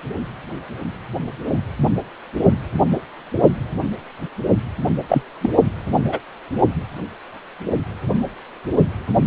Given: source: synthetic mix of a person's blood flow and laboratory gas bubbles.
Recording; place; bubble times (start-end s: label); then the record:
Doppler ultrasound of blood flow; precordium
5.08-5.23 s: bubbles
5.41-5.50 s: bubbles
6.05-6.19 s: bubbles
From the record:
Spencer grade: 2 (many but less than half of the cardiac periods contain bubble signals, singularly or in groups); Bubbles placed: only in the low amplitude regions of the cardiac cycle